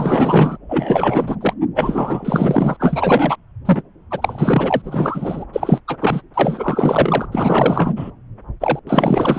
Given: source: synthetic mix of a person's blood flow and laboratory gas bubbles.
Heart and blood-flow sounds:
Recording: Doppler ultrasound of blood flow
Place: subclavian vein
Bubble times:
0.00-0.57 s: bubbles
0.69-1.36 s: bubbles
1.41-1.53 s: bubbles
1.75-2.77 s: bubbles
2.79-3.36 s: bubbles
3.65-3.83 s: bubbles
4.11-5.45 s: bubbles
5.53-5.80 s: bubbles
5.88-5.97 s: bubbles
6.00-6.21 s: bubbles
6.34-7.29 s: bubbles
7.32-8.11 s: bubbles
8.61-8.79 s: bubbles
8.87-9.39 s: bubbles
From the record:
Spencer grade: 4 (maximum detectable bubble signal sounding continuously throughout systole and diastole of every cardiac period, and overriding the amplitude of the normal cardiac signals)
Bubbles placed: anywhere in the cardiac cycle

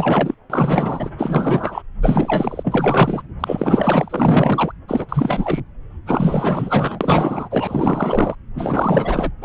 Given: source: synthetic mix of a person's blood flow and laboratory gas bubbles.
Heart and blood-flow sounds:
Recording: Doppler ultrasound of blood flow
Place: subclavian vein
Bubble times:
0.00-0.34 s: bubbles
0.49-1.10 s: bubbles
1.18-1.82 s: bubbles
2.02-3.23 s: bubbles
3.40-4.72 s: bubbles
4.88-5.06 s: bubbles
5.08-5.62 s: bubbles
6.05-8.35 s: bubbles
8.54-9.31 s: bubbles
9.41-9.45 s: bubbles
From the record:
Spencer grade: 4 (maximum detectable bubble signal sounding continuously throughout systole and diastole of every cardiac period, and overriding the amplitude of the normal cardiac signals)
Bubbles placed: anywhere in the cardiac cycle

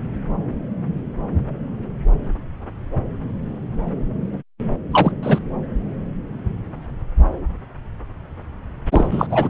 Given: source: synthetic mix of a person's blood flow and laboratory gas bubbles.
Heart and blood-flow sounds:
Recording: Doppler ultrasound of blood flow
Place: subclavian vein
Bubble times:
4.92-5.12 s: bubbles
5.23-5.39 s: bubbles
8.91-9.26 s: bubbles
9.29-9.48 s: bubbles
From the record:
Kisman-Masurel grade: 223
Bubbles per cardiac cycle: several, 3 to 8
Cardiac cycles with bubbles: 10 to 50%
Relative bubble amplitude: loud (0.450 to 0.775)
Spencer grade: 2 (many but less than half of the cardiac periods contain bubble signals, singularly or in groups)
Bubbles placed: anywhere in the cardiac cycle

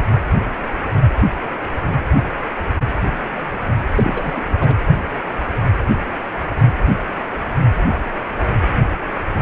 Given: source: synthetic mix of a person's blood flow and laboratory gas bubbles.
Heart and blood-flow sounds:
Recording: Doppler ultrasound of blood flow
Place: precordium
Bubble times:
3.95-4.32 s: bubbles
4.34-4.43 s: bubbles
4.60-4.76 s: bubbles
From the record:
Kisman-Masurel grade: 212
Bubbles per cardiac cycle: several, 3 to 8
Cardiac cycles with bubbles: 1 to 10%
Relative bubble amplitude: moderate (0.250 to 0.450)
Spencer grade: 1 (occasional bubble signal discernible with the cardiac motion signal, with majority of cardiac periods free of bubbles)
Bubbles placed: anywhere in the cardiac cycle

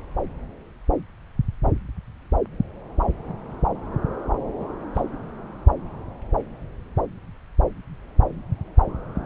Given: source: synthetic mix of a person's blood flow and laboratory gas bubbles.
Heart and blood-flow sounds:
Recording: Doppler ultrasound of blood flow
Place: subclavian vein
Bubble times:
4.59-4.66 s: bubbles
4.95-5.03 s: bubbles
From the record:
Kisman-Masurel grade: 111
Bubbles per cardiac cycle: 1 to 2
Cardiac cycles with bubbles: 1 to 10%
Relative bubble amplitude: barely perceptible (0.100 to 0.250)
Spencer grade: 1 (occasional bubble signal discernible with the cardiac motion signal, with majority of cardiac periods free of bubbles)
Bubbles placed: anywhere in the cardiac cycle

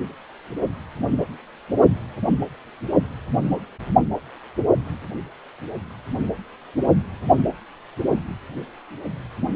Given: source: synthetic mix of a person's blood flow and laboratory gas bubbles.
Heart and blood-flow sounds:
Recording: Doppler ultrasound of blood flow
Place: precordium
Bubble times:
no bubbles
From the record:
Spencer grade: 0 (complete lack of bubble signals)

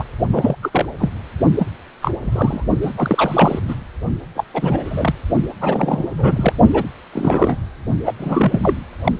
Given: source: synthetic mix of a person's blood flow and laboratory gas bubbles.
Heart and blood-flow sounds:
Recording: Doppler ultrasound of blood flow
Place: precordium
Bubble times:
0.00-0.04 s: bubbles
0.32-0.55 s: bubbles
0.61-0.69 s: bubbles
0.72-0.85 s: bubbles
0.98-1.09 s: bubbles
1.58-1.67 s: bubbles
2.02-2.11 s: bubbles
2.22-2.67 s: bubbles
2.81-2.92 s: bubbles
2.96-3.60 s: bubbles
3.68-3.76 s: bubbles
4.35-4.44 s: bubbles
4.54-5.14 s: bubbles
5.61-6.53 s: bubbles
6.73-6.84 s: bubbles
7.12-7.56 s: bubbles
8.05-8.13 s: bubbles
8.19-8.78 s: bubbles
9.04-9.12 s: bubbles
From the record:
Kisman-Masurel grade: 243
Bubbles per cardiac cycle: several, 3 to 8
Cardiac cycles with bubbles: 100%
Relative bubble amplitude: loud (0.450 to 0.775)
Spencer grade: 3 (all of the cardiac periods contain showers or single bubble signals, but not dominating or overriding the cardiac motion signals)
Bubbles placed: only in the low amplitude regions of the cardiac cycle

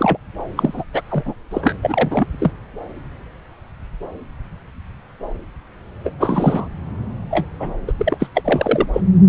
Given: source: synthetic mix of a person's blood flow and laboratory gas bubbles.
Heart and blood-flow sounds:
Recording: Doppler ultrasound of blood flow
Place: subclavian vein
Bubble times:
0.00-0.17 s: bubbles
0.56-0.84 s: bubbles
0.94-1.02 s: bubbles
1.10-1.34 s: bubbles
1.51-1.74 s: bubbles
1.82-2.27 s: bubbles
2.40-2.51 s: bubbles
6.04-6.13 s: bubbles
6.20-6.67 s: bubbles
7.30-7.46 s: bubbles
7.59-7.73 s: bubbles
7.87-7.93 s: bubbles
7.98-8.28 s: bubbles
8.34-8.86 s: bubbles
8.93-9.00 s: bubbles
From the record:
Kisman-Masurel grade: 333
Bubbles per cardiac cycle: rolling drumbeat, 9 or more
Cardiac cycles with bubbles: 50 to 99%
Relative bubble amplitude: loud (0.450 to 0.775)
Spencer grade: 3 (all of the cardiac periods contain showers or single bubble signals, but not dominating or overriding the cardiac motion signals)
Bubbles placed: anywhere in the cardiac cycle

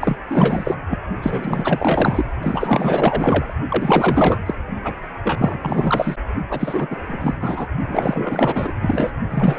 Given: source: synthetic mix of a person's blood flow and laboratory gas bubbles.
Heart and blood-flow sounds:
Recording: Doppler ultrasound of blood flow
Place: precordium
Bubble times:
0.01-0.16 s: bubbles
0.30-0.76 s: bubbles
0.90-0.98 s: bubbles
1.22-2.24 s: bubbles
2.42-3.54 s: bubbles
3.69-4.38 s: bubbles
4.46-4.54 s: bubbles
4.83-4.95 s: bubbles
5.23-5.58 s: bubbles
5.61-6.16 s: bubbles
6.49-6.88 s: bubbles
6.90-6.96 s: bubbles
7.08-7.35 s: bubbles
7.40-7.67 s: bubbles
7.88-8.73 s: bubbles
8.81-9.13 s: bubbles
9.30-9.59 s: bubbles
From the record:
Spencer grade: 4 (maximum detectable bubble signal sounding continuously throughout systole and diastole of every cardiac period, and overriding the amplitude of the normal cardiac signals)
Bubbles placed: only in the low amplitude regions of the cardiac cycle

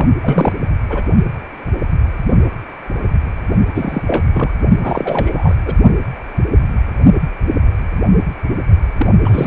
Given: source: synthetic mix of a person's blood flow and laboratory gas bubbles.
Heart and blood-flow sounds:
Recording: Doppler ultrasound of blood flow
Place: precordium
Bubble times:
0.00-0.06 s: bubbles
0.22-0.53 s: bubbles
0.89-1.03 s: bubbles
3.75-4.02 s: bubbles
4.07-4.23 s: bubbles
4.33-4.53 s: bubbles
4.83-5.55 s: bubbles
5.65-5.75 s: bubbles
8.97-9.06 s: bubbles
9.24-9.47 s: bubbles
From the record:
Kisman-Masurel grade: 333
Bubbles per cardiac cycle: rolling drumbeat, 9 or more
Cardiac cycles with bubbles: 50 to 99%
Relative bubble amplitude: loud (0.450 to 0.775)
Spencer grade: 3 (all of the cardiac periods contain showers or single bubble signals, but not dominating or overriding the cardiac motion signals)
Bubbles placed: only in the low amplitude regions of the cardiac cycle

